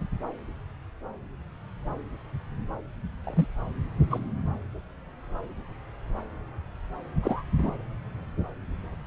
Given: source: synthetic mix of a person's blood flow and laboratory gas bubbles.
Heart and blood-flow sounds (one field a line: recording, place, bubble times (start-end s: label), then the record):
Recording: Doppler ultrasound of blood flow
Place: subclavian vein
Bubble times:
3.23-3.48 s: bubbles
4.10-4.20 s: bubbles
7.23-7.42 s: bubbles
7.58-7.72 s: bubbles
From the record:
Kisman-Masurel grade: 122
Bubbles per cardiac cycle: 1 to 2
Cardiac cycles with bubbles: 10 to 50%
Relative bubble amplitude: moderate (0.250 to 0.450)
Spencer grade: 2 (many but less than half of the cardiac periods contain bubble signals, singularly or in groups)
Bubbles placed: anywhere in the cardiac cycle